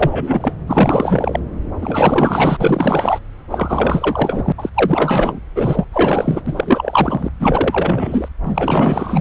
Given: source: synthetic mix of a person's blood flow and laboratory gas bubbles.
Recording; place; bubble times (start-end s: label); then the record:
Doppler ultrasound of blood flow; subclavian vein
0.00-0.53 s: bubbles
0.67-1.40 s: bubbles
1.81-3.20 s: bubbles
3.50-4.52 s: bubbles
4.57-4.69 s: bubbles
4.74-5.39 s: bubbles
5.55-5.88 s: bubbles
5.91-6.42 s: bubbles
6.46-7.29 s: bubbles
7.39-8.29 s: bubbles
8.44-9.21 s: bubbles
From the record:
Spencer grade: 4 (maximum detectable bubble signal sounding continuously throughout systole and diastole of every cardiac period, and overriding the amplitude of the normal cardiac signals); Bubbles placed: anywhere in the cardiac cycle